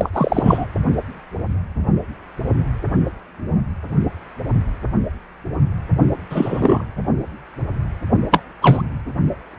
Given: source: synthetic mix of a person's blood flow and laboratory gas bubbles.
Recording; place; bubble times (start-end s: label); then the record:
Doppler ultrasound of blood flow; precordium
0.00-0.10 s: bubbles
0.13-0.66 s: bubbles
6.30-6.83 s: bubbles
8.31-8.40 s: bubbles
8.61-8.82 s: bubbles
From the record:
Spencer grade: 2 (many but less than half of the cardiac periods contain bubble signals, singularly or in groups); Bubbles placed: anywhere in the cardiac cycle